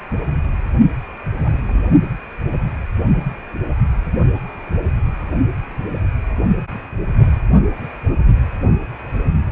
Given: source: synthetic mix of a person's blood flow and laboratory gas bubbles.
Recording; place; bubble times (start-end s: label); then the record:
Doppler ultrasound of blood flow; precordium
1.37-1.91 s: bubbles
From the record:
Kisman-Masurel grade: 111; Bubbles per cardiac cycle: 1 to 2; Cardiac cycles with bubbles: 1 to 10%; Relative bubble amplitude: barely perceptible (0.100 to 0.250); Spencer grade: 1 (occasional bubble signal discernible with the cardiac motion signal, with majority of cardiac periods free of bubbles); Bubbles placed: only in the low amplitude regions of the cardiac cycle